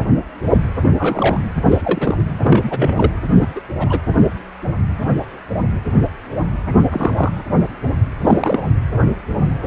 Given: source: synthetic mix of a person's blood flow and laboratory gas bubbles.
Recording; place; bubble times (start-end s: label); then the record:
Doppler ultrasound of blood flow; precordium
0.82-0.92 s: bubbles
0.97-1.43 s: bubbles
1.70-1.81 s: bubbles
1.84-2.17 s: bubbles
2.42-3.12 s: bubbles
3.29-3.60 s: bubbles
3.78-3.99 s: bubbles
6.90-7.32 s: bubbles
8.21-8.68 s: bubbles
From the record:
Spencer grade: 2 (many but less than half of the cardiac periods contain bubble signals, singularly or in groups); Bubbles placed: anywhere in the cardiac cycle